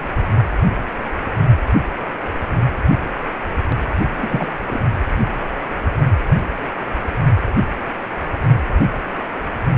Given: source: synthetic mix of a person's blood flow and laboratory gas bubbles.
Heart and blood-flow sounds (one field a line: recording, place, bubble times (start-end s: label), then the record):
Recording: Doppler ultrasound of blood flow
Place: precordium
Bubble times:
4.17-4.48 s: bubbles
4.66-4.80 s: bubbles
From the record:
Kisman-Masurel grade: 212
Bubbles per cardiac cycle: several, 3 to 8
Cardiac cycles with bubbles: 1 to 10%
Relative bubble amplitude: moderate (0.250 to 0.450)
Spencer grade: 1 (occasional bubble signal discernible with the cardiac motion signal, with majority of cardiac periods free of bubbles)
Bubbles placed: anywhere in the cardiac cycle